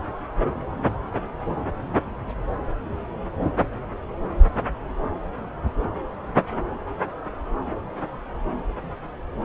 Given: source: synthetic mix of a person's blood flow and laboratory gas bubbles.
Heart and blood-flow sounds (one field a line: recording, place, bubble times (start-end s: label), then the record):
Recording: Doppler ultrasound of blood flow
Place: subclavian vein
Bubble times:
5.82-5.89 s: bubbles
6.36-6.40 s: bubbles
From the record:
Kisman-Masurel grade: 121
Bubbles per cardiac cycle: 1 to 2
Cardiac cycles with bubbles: 10 to 50%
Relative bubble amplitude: barely perceptible (0.100 to 0.250)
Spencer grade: 2 (many but less than half of the cardiac periods contain bubble signals, singularly or in groups)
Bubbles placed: anywhere in the cardiac cycle